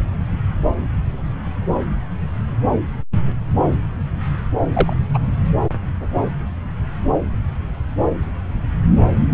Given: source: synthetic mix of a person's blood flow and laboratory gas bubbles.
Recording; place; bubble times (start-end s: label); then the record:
Doppler ultrasound of blood flow; subclavian vein
4.73-4.93 s: bubbles
5.13-5.18 s: bubbles
From the record:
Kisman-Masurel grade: 123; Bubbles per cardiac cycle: 1 to 2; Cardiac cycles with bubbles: 10 to 50%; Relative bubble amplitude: loud (0.450 to 0.775); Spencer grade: 2 (many but less than half of the cardiac periods contain bubble signals, singularly or in groups); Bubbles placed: anywhere in the cardiac cycle